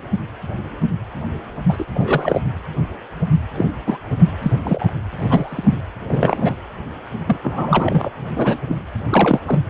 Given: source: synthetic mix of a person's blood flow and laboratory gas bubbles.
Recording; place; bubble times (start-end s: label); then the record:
Doppler ultrasound of blood flow; precordium
1.69-1.85 s: bubbles
1.94-2.41 s: bubbles
3.57-3.70 s: bubbles
3.86-3.97 s: bubbles
4.42-4.51 s: bubbles
4.64-4.91 s: bubbles
5.19-5.76 s: bubbles
6.09-6.55 s: bubbles
7.26-7.37 s: bubbles
7.43-8.10 s: bubbles
8.36-8.60 s: bubbles
8.67-8.81 s: bubbles
9.11-9.39 s: bubbles
9.47-9.60 s: bubbles
From the record:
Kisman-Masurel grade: 233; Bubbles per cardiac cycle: several, 3 to 8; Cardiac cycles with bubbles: 50 to 99%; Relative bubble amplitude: loud (0.450 to 0.775); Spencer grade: 3 (all of the cardiac periods contain showers or single bubble signals, but not dominating or overriding the cardiac motion signals); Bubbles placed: anywhere in the cardiac cycle